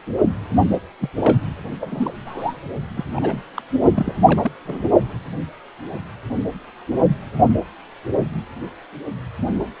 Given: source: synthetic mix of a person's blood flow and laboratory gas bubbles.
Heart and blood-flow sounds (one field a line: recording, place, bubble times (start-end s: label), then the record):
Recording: Doppler ultrasound of blood flow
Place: precordium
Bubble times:
0.99-1.09 s: bubbles
1.17-1.38 s: bubbles
1.80-2.15 s: bubbles
2.25-2.54 s: bubbles
2.96-3.04 s: bubbles
3.15-3.43 s: bubbles
3.56-3.62 s: bubbles
3.94-4.51 s: bubbles
4.64-4.87 s: bubbles
From the record:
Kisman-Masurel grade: 232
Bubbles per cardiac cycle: several, 3 to 8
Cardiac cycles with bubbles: 50 to 99%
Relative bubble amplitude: moderate (0.250 to 0.450)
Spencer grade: 3 (all of the cardiac periods contain showers or single bubble signals, but not dominating or overriding the cardiac motion signals)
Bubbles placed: only in the low amplitude regions of the cardiac cycle